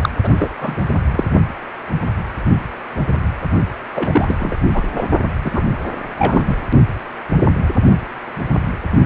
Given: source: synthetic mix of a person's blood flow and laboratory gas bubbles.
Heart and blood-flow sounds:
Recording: Doppler ultrasound of blood flow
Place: precordium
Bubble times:
0.02-0.09 s: bubbles
0.24-0.29 s: bubbles
0.39-0.49 s: bubbles
0.60-0.80 s: bubbles
1.10-1.24 s: bubbles
3.94-4.35 s: bubbles
4.39-4.58 s: bubbles
4.74-4.83 s: bubbles
4.96-5.05 s: bubbles
5.44-5.63 s: bubbles
6.18-6.54 s: bubbles
From the record:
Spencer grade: 2 (many but less than half of the cardiac periods contain bubble signals, singularly or in groups)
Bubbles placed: only in the low amplitude regions of the cardiac cycle

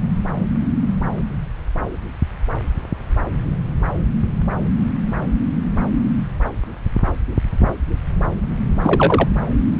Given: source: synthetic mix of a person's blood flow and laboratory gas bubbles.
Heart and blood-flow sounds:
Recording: Doppler ultrasound of blood flow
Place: subclavian vein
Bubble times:
8.82-9.27 s: bubbles
From the record:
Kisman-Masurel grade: 213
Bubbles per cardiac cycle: several, 3 to 8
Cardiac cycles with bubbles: 1 to 10%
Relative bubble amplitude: loud (0.450 to 0.775)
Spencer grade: 1 (occasional bubble signal discernible with the cardiac motion signal, with majority of cardiac periods free of bubbles)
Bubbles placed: anywhere in the cardiac cycle

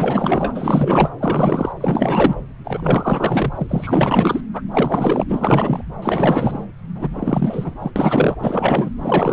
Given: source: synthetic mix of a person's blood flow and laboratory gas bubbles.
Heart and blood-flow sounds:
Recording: Doppler ultrasound of blood flow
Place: subclavian vein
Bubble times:
0.00-1.09 s: bubbles
1.18-1.73 s: bubbles
1.80-2.42 s: bubbles
2.64-4.41 s: bubbles
4.54-4.62 s: bubbles
4.71-5.24 s: bubbles
5.28-5.83 s: bubbles
6.02-6.64 s: bubbles
6.95-7.76 s: bubbles
7.79-7.92 s: bubbles
7.96-8.36 s: bubbles
8.39-8.89 s: bubbles
8.99-9.33 s: bubbles
From the record:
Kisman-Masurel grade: 444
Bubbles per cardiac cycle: continuous sound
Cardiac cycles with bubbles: 100%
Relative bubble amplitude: maximal (0.775 to 0.999)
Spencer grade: 4 (maximum detectable bubble signal sounding continuously throughout systole and diastole of every cardiac period, and overriding the amplitude of the normal cardiac signals)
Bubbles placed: anywhere in the cardiac cycle

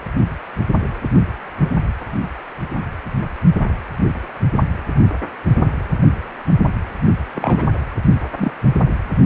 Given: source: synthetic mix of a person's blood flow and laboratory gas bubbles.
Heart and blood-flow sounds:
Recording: Doppler ultrasound of blood flow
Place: precordium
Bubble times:
7.34-7.64 s: bubbles
8.37-8.51 s: bubbles
From the record:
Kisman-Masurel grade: 122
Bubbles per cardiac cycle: 1 to 2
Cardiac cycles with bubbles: 10 to 50%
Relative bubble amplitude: moderate (0.250 to 0.450)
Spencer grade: 2 (many but less than half of the cardiac periods contain bubble signals, singularly or in groups)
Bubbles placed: only in the low amplitude regions of the cardiac cycle

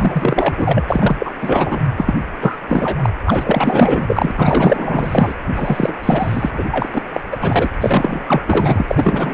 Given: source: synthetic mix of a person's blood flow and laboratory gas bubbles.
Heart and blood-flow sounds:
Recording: Doppler ultrasound of blood flow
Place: precordium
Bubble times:
0.00-0.82 s: bubbles
0.88-1.34 s: bubbles
1.40-1.80 s: bubbles
1.97-2.14 s: bubbles
2.40-2.56 s: bubbles
2.68-3.13 s: bubbles
3.25-4.31 s: bubbles
4.35-5.34 s: bubbles
5.55-6.63 s: bubbles
6.71-6.89 s: bubbles
6.92-7.02 s: bubbles
7.12-7.21 s: bubbles
7.31-7.37 s: bubbles
7.41-7.69 s: bubbles
7.81-8.42 s: bubbles
8.46-9.34 s: bubbles
From the record:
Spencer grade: 4 (maximum detectable bubble signal sounding continuously throughout systole and diastole of every cardiac period, and overriding the amplitude of the normal cardiac signals)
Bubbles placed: anywhere in the cardiac cycle

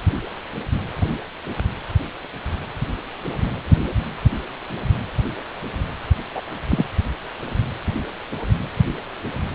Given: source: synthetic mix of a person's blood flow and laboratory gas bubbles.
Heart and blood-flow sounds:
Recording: Doppler ultrasound of blood flow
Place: precordium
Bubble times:
6.35-6.42 s: bubbles
6.71-6.84 s: bubbles
From the record:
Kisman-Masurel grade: 112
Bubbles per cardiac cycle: 1 to 2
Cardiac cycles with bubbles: 1 to 10%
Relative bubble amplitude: moderate (0.250 to 0.450)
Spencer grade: 1 (occasional bubble signal discernible with the cardiac motion signal, with majority of cardiac periods free of bubbles)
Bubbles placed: anywhere in the cardiac cycle

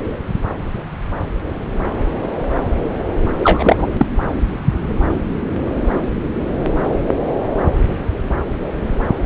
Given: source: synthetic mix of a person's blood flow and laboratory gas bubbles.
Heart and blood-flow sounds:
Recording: Doppler ultrasound of blood flow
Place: subclavian vein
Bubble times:
3.40-3.87 s: bubbles
3.97-4.05 s: bubbles
From the record:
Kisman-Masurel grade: 213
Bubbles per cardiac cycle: several, 3 to 8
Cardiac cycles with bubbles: 1 to 10%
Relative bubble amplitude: loud (0.450 to 0.775)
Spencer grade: 1 (occasional bubble signal discernible with the cardiac motion signal, with majority of cardiac periods free of bubbles)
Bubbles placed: anywhere in the cardiac cycle

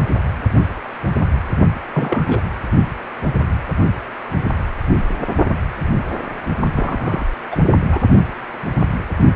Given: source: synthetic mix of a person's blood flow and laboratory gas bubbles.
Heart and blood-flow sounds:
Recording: Doppler ultrasound of blood flow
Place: precordium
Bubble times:
1.94-2.42 s: bubbles
6.74-7.25 s: bubbles
7.51-7.56 s: bubbles
7.87-8.08 s: bubbles
From the record:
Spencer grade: 2 (many but less than half of the cardiac periods contain bubble signals, singularly or in groups)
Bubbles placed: only in the low amplitude regions of the cardiac cycle

